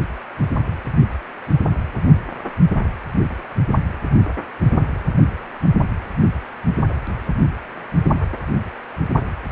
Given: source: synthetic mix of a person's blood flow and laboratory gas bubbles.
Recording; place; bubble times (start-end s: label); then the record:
Doppler ultrasound of blood flow; precordium
no bubbles
From the record:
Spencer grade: 0 (complete lack of bubble signals)